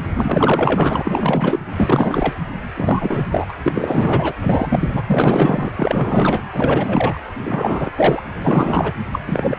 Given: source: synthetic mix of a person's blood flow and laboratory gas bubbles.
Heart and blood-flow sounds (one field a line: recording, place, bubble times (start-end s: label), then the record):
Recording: Doppler ultrasound of blood flow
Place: precordium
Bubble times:
0.14-1.59 s: bubbles
1.76-2.36 s: bubbles
2.75-3.27 s: bubbles
3.30-3.54 s: bubbles
3.62-4.34 s: bubbles
4.41-5.04 s: bubbles
5.07-5.71 s: bubbles
5.77-6.43 s: bubbles
6.52-7.21 s: bubbles
7.40-7.91 s: bubbles
7.96-8.22 s: bubbles
8.44-8.93 s: bubbles
9.11-9.20 s: bubbles
9.27-9.59 s: bubbles
From the record:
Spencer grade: 4 (maximum detectable bubble signal sounding continuously throughout systole and diastole of every cardiac period, and overriding the amplitude of the normal cardiac signals)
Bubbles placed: anywhere in the cardiac cycle